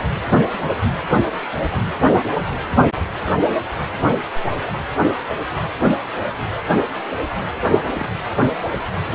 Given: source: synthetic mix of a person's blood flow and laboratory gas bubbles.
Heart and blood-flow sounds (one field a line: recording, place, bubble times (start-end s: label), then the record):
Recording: Doppler ultrasound of blood flow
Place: precordium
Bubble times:
7.63-7.77 s: bubbles
7.93-8.10 s: bubbles
From the record:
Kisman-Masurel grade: 111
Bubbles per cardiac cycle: 1 to 2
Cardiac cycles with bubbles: 1 to 10%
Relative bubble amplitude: barely perceptible (0.100 to 0.250)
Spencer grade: 1 (occasional bubble signal discernible with the cardiac motion signal, with majority of cardiac periods free of bubbles)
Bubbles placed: anywhere in the cardiac cycle